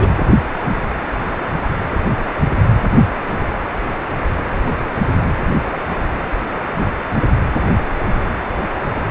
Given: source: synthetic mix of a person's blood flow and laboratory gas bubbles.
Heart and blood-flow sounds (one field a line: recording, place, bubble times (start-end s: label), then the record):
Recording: Doppler ultrasound of blood flow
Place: precordium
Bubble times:
0.00-0.08 s: bubbles
7.14-7.22 s: bubbles
From the record:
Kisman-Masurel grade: 123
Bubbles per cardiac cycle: 1 to 2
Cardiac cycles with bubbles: 10 to 50%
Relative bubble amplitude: loud (0.450 to 0.775)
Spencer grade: 2 (many but less than half of the cardiac periods contain bubble signals, singularly or in groups)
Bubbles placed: anywhere in the cardiac cycle